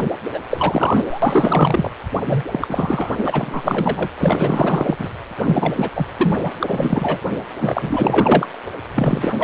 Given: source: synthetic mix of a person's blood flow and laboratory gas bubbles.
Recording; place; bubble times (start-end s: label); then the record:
Doppler ultrasound of blood flow; precordium
0.00-0.12 s: bubbles
0.33-0.40 s: bubbles
0.50-1.91 s: bubbles
2.25-2.43 s: bubbles
2.51-4.08 s: bubbles
4.17-5.08 s: bubbles
5.38-5.90 s: bubbles
5.95-6.07 s: bubbles
6.18-6.40 s: bubbles
6.44-6.50 s: bubbles
6.60-7.20 s: bubbles
7.60-8.47 s: bubbles
8.95-9.34 s: bubbles
9.38-9.44 s: bubbles
From the record:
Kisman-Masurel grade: 444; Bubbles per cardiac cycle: continuous sound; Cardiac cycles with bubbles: 100%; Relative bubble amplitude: maximal (0.775 to 0.999); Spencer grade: 4 (maximum detectable bubble signal sounding continuously throughout systole and diastole of every cardiac period, and overriding the amplitude of the normal cardiac signals); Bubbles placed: anywhere in the cardiac cycle